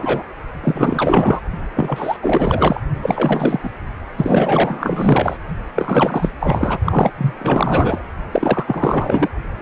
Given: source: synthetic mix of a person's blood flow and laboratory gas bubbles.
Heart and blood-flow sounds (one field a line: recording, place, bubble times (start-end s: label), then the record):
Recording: Doppler ultrasound of blood flow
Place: precordium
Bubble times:
0.00-0.23 s: bubbles
0.64-1.41 s: bubbles
1.74-2.17 s: bubbles
2.22-2.81 s: bubbles
3.02-3.60 s: bubbles
3.63-3.70 s: bubbles
4.17-5.37 s: bubbles
5.75-6.32 s: bubbles
6.40-6.79 s: bubbles
6.84-7.11 s: bubbles
7.17-7.33 s: bubbles
7.38-8.02 s: bubbles
8.31-8.64 s: bubbles
8.67-9.29 s: bubbles
9.59-9.61 s: bubbles
From the record:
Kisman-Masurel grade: 444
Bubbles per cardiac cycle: continuous sound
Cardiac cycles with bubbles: 100%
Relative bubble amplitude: maximal (0.775 to 0.999)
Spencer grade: 4 (maximum detectable bubble signal sounding continuously throughout systole and diastole of every cardiac period, and overriding the amplitude of the normal cardiac signals)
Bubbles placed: only in the low amplitude regions of the cardiac cycle